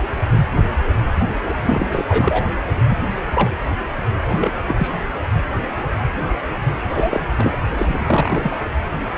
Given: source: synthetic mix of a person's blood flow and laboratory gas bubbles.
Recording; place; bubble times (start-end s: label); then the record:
Doppler ultrasound of blood flow; precordium
1.61-1.86 s: bubbles
1.92-2.45 s: bubbles
2.90-2.97 s: bubbles
3.17-3.50 s: bubbles
4.12-4.33 s: bubbles
4.36-4.52 s: bubbles
4.65-4.90 s: bubbles
6.89-7.21 s: bubbles
7.37-7.56 s: bubbles
7.77-8.56 s: bubbles
From the record:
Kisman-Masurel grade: 222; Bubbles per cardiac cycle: several, 3 to 8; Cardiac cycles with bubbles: 10 to 50%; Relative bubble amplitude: moderate (0.250 to 0.450); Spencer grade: 2 (many but less than half of the cardiac periods contain bubble signals, singularly or in groups); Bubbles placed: anywhere in the cardiac cycle